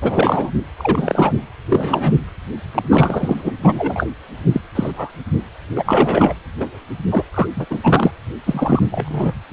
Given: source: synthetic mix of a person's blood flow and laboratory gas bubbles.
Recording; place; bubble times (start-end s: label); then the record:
Doppler ultrasound of blood flow; precordium
0.02-0.50 s: bubbles
0.78-1.32 s: bubbles
1.69-2.15 s: bubbles
2.75-2.82 s: bubbles
2.90-3.50 s: bubbles
3.62-4.06 s: bubbles
4.52-4.61 s: bubbles
4.75-5.12 s: bubbles
5.70-5.73 s: bubbles
5.76-6.35 s: bubbles
6.60-6.68 s: bubbles
7.10-7.23 s: bubbles
7.34-7.48 s: bubbles
7.56-7.66 s: bubbles
7.70-7.79 s: bubbles
7.83-8.11 s: bubbles
8.46-9.33 s: bubbles
From the record:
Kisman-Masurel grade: 243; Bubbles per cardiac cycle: several, 3 to 8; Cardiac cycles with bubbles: 100%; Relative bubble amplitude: loud (0.450 to 0.775); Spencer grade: 3 (all of the cardiac periods contain showers or single bubble signals, but not dominating or overriding the cardiac motion signals); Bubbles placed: anywhere in the cardiac cycle